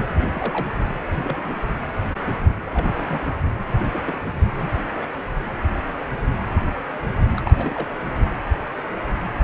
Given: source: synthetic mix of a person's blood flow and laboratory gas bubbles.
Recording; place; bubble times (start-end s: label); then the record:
Doppler ultrasound of blood flow; precordium
0.18-0.26 s: bubbles
0.33-0.71 s: bubbles
1.13-1.57 s: bubbles
1.66-1.71 s: bubbles
2.27-2.33 s: bubbles
2.48-2.53 s: bubbles
2.60-3.19 s: bubbles
3.92-4.01 s: bubbles
4.04-4.18 s: bubbles
4.54-4.71 s: bubbles
5.01-5.05 s: bubbles
7.36-7.42 s: bubbles
7.46-7.93 s: bubbles
From the record:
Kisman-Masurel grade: 221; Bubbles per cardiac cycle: several, 3 to 8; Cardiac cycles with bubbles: 10 to 50%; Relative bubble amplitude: barely perceptible (0.100 to 0.250); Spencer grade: 2 (many but less than half of the cardiac periods contain bubble signals, singularly or in groups); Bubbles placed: anywhere in the cardiac cycle